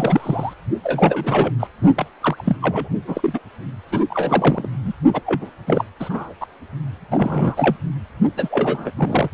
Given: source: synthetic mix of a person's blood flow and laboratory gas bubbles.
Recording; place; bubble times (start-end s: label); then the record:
Doppler ultrasound of blood flow; precordium
0.00-0.53 s: bubbles
0.83-1.52 s: bubbles
1.60-1.67 s: bubbles
1.96-2.06 s: bubbles
2.21-2.56 s: bubbles
2.62-2.89 s: bubbles
3.07-3.40 s: bubbles
3.92-4.06 s: bubbles
4.09-4.68 s: bubbles
4.85-4.92 s: bubbles
5.13-5.21 s: bubbles
5.25-5.50 s: bubbles
5.67-5.83 s: bubbles
5.99-6.33 s: bubbles
6.40-6.46 s: bubbles
7.11-7.76 s: bubbles
8.37-8.91 s: bubbles
8.96-9.30 s: bubbles
From the record:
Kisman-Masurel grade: 343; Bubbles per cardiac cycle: rolling drumbeat, 9 or more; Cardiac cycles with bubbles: 100%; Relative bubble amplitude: loud (0.450 to 0.775); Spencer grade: 3 (all of the cardiac periods contain showers or single bubble signals, but not dominating or overriding the cardiac motion signals); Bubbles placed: only in the low amplitude regions of the cardiac cycle